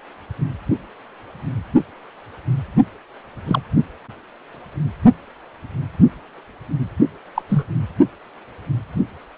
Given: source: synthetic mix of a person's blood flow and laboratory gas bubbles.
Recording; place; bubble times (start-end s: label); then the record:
Doppler ultrasound of blood flow; precordium
3.46-3.61 s: bubbles
7.35-7.42 s: bubbles
7.49-7.66 s: bubbles
From the record:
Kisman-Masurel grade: 122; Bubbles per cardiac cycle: 1 to 2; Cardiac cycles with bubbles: 10 to 50%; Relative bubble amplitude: moderate (0.250 to 0.450); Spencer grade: 2 (many but less than half of the cardiac periods contain bubble signals, singularly or in groups); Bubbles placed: only in the low amplitude regions of the cardiac cycle